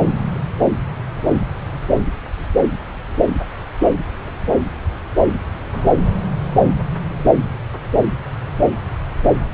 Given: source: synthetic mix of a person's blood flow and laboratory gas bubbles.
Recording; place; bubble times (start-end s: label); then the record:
Doppler ultrasound of blood flow; subclavian vein
5.72-5.91 s: bubbles
From the record:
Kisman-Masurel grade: 111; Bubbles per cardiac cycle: 1 to 2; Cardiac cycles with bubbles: 1 to 10%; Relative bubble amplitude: barely perceptible (0.100 to 0.250); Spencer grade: 1 (occasional bubble signal discernible with the cardiac motion signal, with majority of cardiac periods free of bubbles); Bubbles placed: anywhere in the cardiac cycle